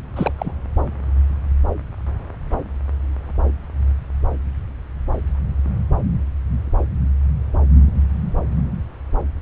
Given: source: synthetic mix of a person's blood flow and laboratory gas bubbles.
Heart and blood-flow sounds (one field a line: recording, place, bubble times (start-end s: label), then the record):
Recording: Doppler ultrasound of blood flow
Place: subclavian vein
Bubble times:
0.16-0.33 s: bubbles
0.38-0.53 s: bubbles
From the record:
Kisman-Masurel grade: 212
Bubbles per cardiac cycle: several, 3 to 8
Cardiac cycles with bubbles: 1 to 10%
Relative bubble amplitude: moderate (0.250 to 0.450)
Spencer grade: 1 (occasional bubble signal discernible with the cardiac motion signal, with majority of cardiac periods free of bubbles)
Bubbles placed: anywhere in the cardiac cycle